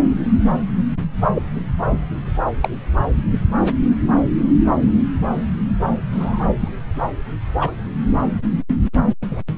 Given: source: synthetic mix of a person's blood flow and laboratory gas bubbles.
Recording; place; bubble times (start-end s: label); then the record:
Doppler ultrasound of blood flow; subclavian vein
1.33-1.43 s: bubbles
2.61-2.69 s: bubbles
6.12-6.46 s: bubbles
6.60-6.69 s: bubbles
7.60-7.71 s: bubbles
9.31-9.41 s: bubbles
From the record:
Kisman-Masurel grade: 122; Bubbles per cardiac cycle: 1 to 2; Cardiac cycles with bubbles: 10 to 50%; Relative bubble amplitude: moderate (0.250 to 0.450); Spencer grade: 2 (many but less than half of the cardiac periods contain bubble signals, singularly or in groups); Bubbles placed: anywhere in the cardiac cycle